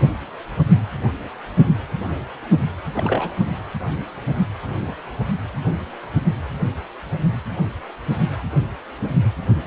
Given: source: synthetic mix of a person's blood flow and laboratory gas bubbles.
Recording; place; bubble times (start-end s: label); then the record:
Doppler ultrasound of blood flow; precordium
2.94-3.36 s: bubbles
From the record:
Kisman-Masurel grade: 221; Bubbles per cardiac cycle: several, 3 to 8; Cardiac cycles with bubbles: 10 to 50%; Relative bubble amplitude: barely perceptible (0.100 to 0.250); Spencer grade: 2 (many but less than half of the cardiac periods contain bubble signals, singularly or in groups); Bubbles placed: anywhere in the cardiac cycle